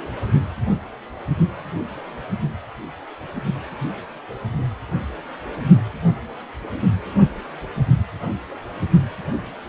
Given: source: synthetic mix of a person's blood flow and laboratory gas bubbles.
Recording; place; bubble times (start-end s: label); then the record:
Doppler ultrasound of blood flow; precordium
no bubbles
From the record:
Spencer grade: 0 (complete lack of bubble signals)